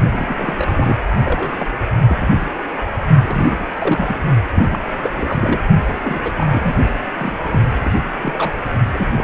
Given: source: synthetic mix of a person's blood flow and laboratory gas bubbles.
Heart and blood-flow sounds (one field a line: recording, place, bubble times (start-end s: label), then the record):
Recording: Doppler ultrasound of blood flow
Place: precordium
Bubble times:
0.11-0.66 s: bubbles
0.69-0.98 s: bubbles
1.25-1.52 s: bubbles
1.57-1.68 s: bubbles
2.06-2.30 s: bubbles
3.23-4.19 s: bubbles
4.54-4.79 s: bubbles
5.02-5.10 s: bubbles
5.16-5.60 s: bubbles
6.03-6.33 s: bubbles
6.36-6.75 s: bubbles
7.17-7.63 s: bubbles
7.81-7.91 s: bubbles
8.23-8.53 s: bubbles
8.94-9.24 s: bubbles
From the record:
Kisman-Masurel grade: 242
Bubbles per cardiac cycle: several, 3 to 8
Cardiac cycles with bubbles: 100%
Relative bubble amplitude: moderate (0.250 to 0.450)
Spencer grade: 3 (all of the cardiac periods contain showers or single bubble signals, but not dominating or overriding the cardiac motion signals)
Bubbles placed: only in the low amplitude regions of the cardiac cycle